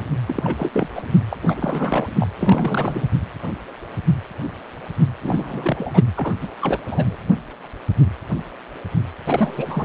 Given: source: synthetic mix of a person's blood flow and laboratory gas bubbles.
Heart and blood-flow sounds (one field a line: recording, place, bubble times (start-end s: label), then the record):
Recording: Doppler ultrasound of blood flow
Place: precordium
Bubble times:
0.27-0.89 s: bubbles
0.95-1.02 s: bubbles
1.30-1.36 s: bubbles
1.42-2.07 s: bubbles
2.19-2.27 s: bubbles
2.40-3.15 s: bubbles
5.21-6.03 s: bubbles
6.16-6.32 s: bubbles
6.41-6.48 s: bubbles
6.60-6.80 s: bubbles
6.88-7.17 s: bubbles
9.26-9.85 s: bubbles
From the record:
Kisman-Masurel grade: 332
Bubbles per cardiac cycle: rolling drumbeat, 9 or more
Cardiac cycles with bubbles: 50 to 99%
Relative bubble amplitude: moderate (0.250 to 0.450)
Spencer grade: 3 (all of the cardiac periods contain showers or single bubble signals, but not dominating or overriding the cardiac motion signals)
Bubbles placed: anywhere in the cardiac cycle